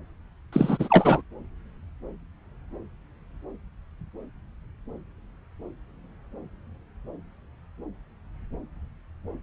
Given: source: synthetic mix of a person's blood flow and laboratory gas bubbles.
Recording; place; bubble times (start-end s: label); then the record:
Doppler ultrasound of blood flow; subclavian vein
0.52-1.21 s: bubbles
From the record:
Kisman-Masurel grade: 212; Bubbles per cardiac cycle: several, 3 to 8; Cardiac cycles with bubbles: 1 to 10%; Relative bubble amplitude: moderate (0.250 to 0.450); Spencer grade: 1 (occasional bubble signal discernible with the cardiac motion signal, with majority of cardiac periods free of bubbles); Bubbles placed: anywhere in the cardiac cycle